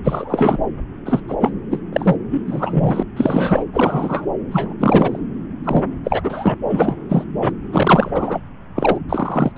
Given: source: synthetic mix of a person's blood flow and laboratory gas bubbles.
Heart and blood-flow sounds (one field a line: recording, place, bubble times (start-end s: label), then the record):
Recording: Doppler ultrasound of blood flow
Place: subclavian vein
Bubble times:
0.04-0.61 s: bubbles
1.05-1.22 s: bubbles
1.27-1.35 s: bubbles
1.40-1.52 s: bubbles
1.70-1.79 s: bubbles
1.92-2.16 s: bubbles
2.31-2.42 s: bubbles
2.47-3.03 s: bubbles
3.16-3.65 s: bubbles
3.73-4.26 s: bubbles
4.51-4.74 s: bubbles
4.79-5.19 s: bubbles
5.63-5.83 s: bubbles
6.04-6.57 s: bubbles
6.69-6.96 s: bubbles
7.09-7.24 s: bubbles
7.41-7.51 s: bubbles
7.72-8.40 s: bubbles
8.75-9.00 s: bubbles
9.09-9.52 s: bubbles
9.56-9.58 s: bubbles
From the record:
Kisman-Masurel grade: 343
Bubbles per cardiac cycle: rolling drumbeat, 9 or more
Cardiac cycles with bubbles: 100%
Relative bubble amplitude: loud (0.450 to 0.775)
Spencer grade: 3 (all of the cardiac periods contain showers or single bubble signals, but not dominating or overriding the cardiac motion signals)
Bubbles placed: anywhere in the cardiac cycle